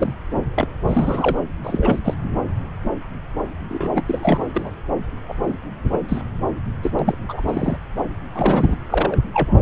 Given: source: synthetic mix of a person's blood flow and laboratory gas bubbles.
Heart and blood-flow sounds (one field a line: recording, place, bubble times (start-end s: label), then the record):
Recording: Doppler ultrasound of blood flow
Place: subclavian vein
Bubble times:
0.00-0.14 s: bubbles
0.58-0.68 s: bubbles
0.88-1.37 s: bubbles
1.64-1.99 s: bubbles
2.04-2.14 s: bubbles
2.36-2.42 s: bubbles
3.69-4.02 s: bubbles
4.05-4.76 s: bubbles
5.28-5.36 s: bubbles
5.42-5.55 s: bubbles
5.92-5.99 s: bubbles
6.08-6.21 s: bubbles
6.83-6.92 s: bubbles
6.99-7.16 s: bubbles
7.28-7.76 s: bubbles
8.33-8.76 s: bubbles
8.89-9.20 s: bubbles
9.33-9.53 s: bubbles
From the record:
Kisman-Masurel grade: 232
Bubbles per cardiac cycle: several, 3 to 8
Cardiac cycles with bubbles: 50 to 99%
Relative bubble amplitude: moderate (0.250 to 0.450)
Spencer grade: 3 (all of the cardiac periods contain showers or single bubble signals, but not dominating or overriding the cardiac motion signals)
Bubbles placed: anywhere in the cardiac cycle